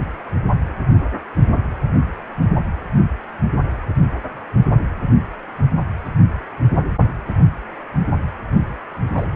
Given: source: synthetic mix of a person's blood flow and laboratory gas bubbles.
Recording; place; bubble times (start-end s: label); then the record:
Doppler ultrasound of blood flow; precordium
9.17-9.27 s: bubbles
From the record:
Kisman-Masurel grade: 123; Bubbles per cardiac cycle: 1 to 2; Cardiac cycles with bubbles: 10 to 50%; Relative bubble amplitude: loud (0.450 to 0.775); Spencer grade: 2 (many but less than half of the cardiac periods contain bubble signals, singularly or in groups); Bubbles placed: only in the low amplitude regions of the cardiac cycle